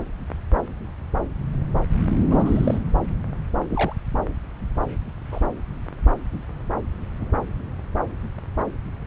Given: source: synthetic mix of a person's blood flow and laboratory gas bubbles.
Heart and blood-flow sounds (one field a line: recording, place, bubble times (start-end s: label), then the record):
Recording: Doppler ultrasound of blood flow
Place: subclavian vein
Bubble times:
2.29-2.78 s: bubbles
3.70-3.94 s: bubbles
5.32-5.41 s: bubbles
7.20-7.38 s: bubbles
From the record:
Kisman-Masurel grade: 121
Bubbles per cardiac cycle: 1 to 2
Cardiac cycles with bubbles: 10 to 50%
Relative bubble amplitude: barely perceptible (0.100 to 0.250)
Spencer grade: 2 (many but less than half of the cardiac periods contain bubble signals, singularly or in groups)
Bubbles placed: anywhere in the cardiac cycle